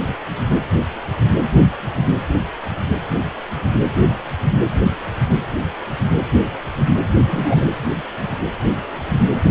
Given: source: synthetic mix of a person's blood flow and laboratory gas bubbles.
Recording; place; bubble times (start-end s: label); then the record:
Doppler ultrasound of blood flow; precordium
7.24-7.66 s: bubbles
From the record:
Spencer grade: 1 (occasional bubble signal discernible with the cardiac motion signal, with majority of cardiac periods free of bubbles); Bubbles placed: anywhere in the cardiac cycle